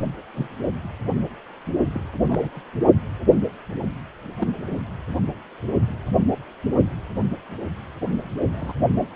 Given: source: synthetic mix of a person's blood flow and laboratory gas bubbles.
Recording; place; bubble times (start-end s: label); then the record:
Doppler ultrasound of blood flow; precordium
0.34-0.48 s: bubbles
1.94-2.00 s: bubbles
2.28-2.61 s: bubbles
4.39-4.48 s: bubbles
4.64-4.79 s: bubbles
8.52-8.73 s: bubbles
From the record:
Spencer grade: 2 (many but less than half of the cardiac periods contain bubble signals, singularly or in groups); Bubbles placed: only in the low amplitude regions of the cardiac cycle